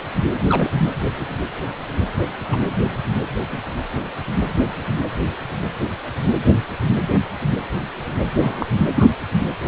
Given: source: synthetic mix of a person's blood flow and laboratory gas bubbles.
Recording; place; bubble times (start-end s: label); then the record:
Doppler ultrasound of blood flow; precordium
0.49-0.70 s: bubbles
2.50-2.60 s: bubbles
3.52-3.58 s: bubbles
8.40-8.67 s: bubbles
8.95-9.09 s: bubbles
From the record:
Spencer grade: 2 (many but less than half of the cardiac periods contain bubble signals, singularly or in groups); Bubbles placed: anywhere in the cardiac cycle